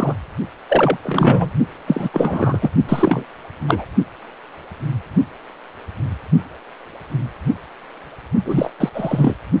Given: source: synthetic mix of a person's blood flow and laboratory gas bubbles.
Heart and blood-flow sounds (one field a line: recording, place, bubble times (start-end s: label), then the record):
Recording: Doppler ultrasound of blood flow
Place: precordium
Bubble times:
0.00-0.14 s: bubbles
0.69-0.97 s: bubbles
1.04-1.50 s: bubbles
1.87-2.09 s: bubbles
2.13-2.58 s: bubbles
2.62-2.71 s: bubbles
2.88-3.25 s: bubbles
3.67-3.85 s: bubbles
8.45-8.71 s: bubbles
8.80-8.89 s: bubbles
8.94-9.37 s: bubbles
From the record:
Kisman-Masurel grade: 233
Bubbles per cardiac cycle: several, 3 to 8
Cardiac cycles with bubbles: 50 to 99%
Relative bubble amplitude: loud (0.450 to 0.775)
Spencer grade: 3 (all of the cardiac periods contain showers or single bubble signals, but not dominating or overriding the cardiac motion signals)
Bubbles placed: only in the low amplitude regions of the cardiac cycle